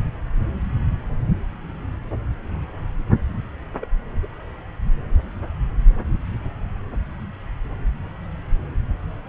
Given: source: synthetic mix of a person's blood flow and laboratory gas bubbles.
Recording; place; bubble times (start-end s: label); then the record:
Doppler ultrasound of blood flow; subclavian vein
3.81-3.86 s: bubbles
4.12-4.27 s: bubbles
From the record:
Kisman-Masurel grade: 221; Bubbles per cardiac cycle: several, 3 to 8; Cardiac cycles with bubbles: 10 to 50%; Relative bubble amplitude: barely perceptible (0.100 to 0.250); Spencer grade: 2 (many but less than half of the cardiac periods contain bubble signals, singularly or in groups); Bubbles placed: anywhere in the cardiac cycle